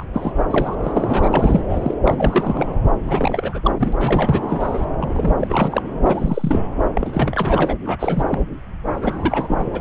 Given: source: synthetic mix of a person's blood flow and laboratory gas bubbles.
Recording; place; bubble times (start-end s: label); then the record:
Doppler ultrasound of blood flow; subclavian vein
0.00-0.06 s: bubbles
0.14-0.32 s: bubbles
0.50-0.75 s: bubbles
0.83-1.28 s: bubbles
1.33-1.64 s: bubbles
1.69-1.94 s: bubbles
2.04-2.74 s: bubbles
3.07-3.59 s: bubbles
3.65-3.71 s: bubbles
3.79-4.86 s: bubbles
4.99-5.33 s: bubbles
5.40-5.82 s: bubbles
6.03-6.62 s: bubbles
6.95-7.75 s: bubbles
7.85-8.23 s: bubbles
8.26-8.40 s: bubbles
8.89-9.70 s: bubbles
9.72-9.81 s: bubbles
From the record:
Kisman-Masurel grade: 342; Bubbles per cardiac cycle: rolling drumbeat, 9 or more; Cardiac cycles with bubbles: 100%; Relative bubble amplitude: moderate (0.250 to 0.450); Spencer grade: 3 (all of the cardiac periods contain showers or single bubble signals, but not dominating or overriding the cardiac motion signals); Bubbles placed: anywhere in the cardiac cycle